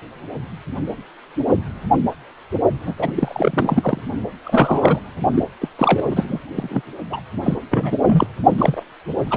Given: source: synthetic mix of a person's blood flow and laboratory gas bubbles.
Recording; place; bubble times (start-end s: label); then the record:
Doppler ultrasound of blood flow; precordium
2.86-2.95 s: bubbles
2.98-4.01 s: bubbles
4.44-4.99 s: bubbles
5.34-5.43 s: bubbles
5.61-5.68 s: bubbles
5.78-6.06 s: bubbles
6.10-6.25 s: bubbles
6.29-6.38 s: bubbles
6.56-6.82 s: bubbles
7.10-7.20 s: bubbles
7.43-7.56 s: bubbles
7.70-7.98 s: bubbles
8.06-8.27 s: bubbles
8.58-8.83 s: bubbles
9.26-9.37 s: bubbles
From the record:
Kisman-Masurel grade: 332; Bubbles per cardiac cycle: rolling drumbeat, 9 or more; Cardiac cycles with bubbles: 50 to 99%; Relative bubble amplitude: moderate (0.250 to 0.450); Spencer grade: 3 (all of the cardiac periods contain showers or single bubble signals, but not dominating or overriding the cardiac motion signals); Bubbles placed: only in the low amplitude regions of the cardiac cycle